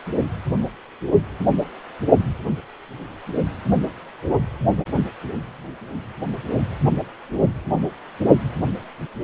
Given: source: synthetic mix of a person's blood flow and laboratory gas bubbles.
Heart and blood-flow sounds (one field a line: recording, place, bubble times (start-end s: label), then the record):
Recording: Doppler ultrasound of blood flow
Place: precordium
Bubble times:
no bubbles
From the record:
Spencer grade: 0 (complete lack of bubble signals)